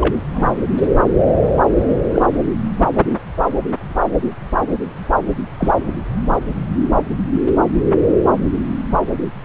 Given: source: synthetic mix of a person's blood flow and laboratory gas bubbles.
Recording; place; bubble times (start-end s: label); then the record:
Doppler ultrasound of blood flow; subclavian vein
0.01-0.16 s: bubbles
0.29-0.57 s: bubbles
2.14-2.27 s: bubbles
5.59-5.72 s: bubbles
From the record:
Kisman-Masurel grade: 122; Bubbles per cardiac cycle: 1 to 2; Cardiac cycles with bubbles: 10 to 50%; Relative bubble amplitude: moderate (0.250 to 0.450); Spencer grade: 2 (many but less than half of the cardiac periods contain bubble signals, singularly or in groups); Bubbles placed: anywhere in the cardiac cycle